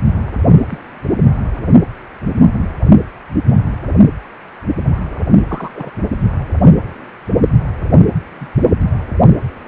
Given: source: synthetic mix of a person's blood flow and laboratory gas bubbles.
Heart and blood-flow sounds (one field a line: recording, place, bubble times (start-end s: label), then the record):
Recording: Doppler ultrasound of blood flow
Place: precordium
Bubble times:
0.55-0.64 s: bubbles
0.69-0.79 s: bubbles
5.47-5.98 s: bubbles
8.41-8.48 s: bubbles
From the record:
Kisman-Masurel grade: 122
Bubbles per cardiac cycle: 1 to 2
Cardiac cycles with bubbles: 10 to 50%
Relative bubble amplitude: moderate (0.250 to 0.450)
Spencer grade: 2 (many but less than half of the cardiac periods contain bubble signals, singularly or in groups)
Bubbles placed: anywhere in the cardiac cycle